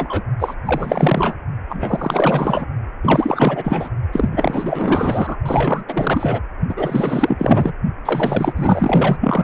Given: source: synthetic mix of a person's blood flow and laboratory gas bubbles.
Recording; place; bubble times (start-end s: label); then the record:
Doppler ultrasound of blood flow; precordium
0.00-0.23 s: bubbles
0.39-0.55 s: bubbles
0.65-1.35 s: bubbles
1.68-2.66 s: bubbles
3.03-3.90 s: bubbles
4.12-5.36 s: bubbles
5.45-5.84 s: bubbles
5.88-6.41 s: bubbles
6.69-7.73 s: bubbles
8.05-9.17 s: bubbles
9.20-9.44 s: bubbles
From the record:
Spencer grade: 4 (maximum detectable bubble signal sounding continuously throughout systole and diastole of every cardiac period, and overriding the amplitude of the normal cardiac signals); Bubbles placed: only in the low amplitude regions of the cardiac cycle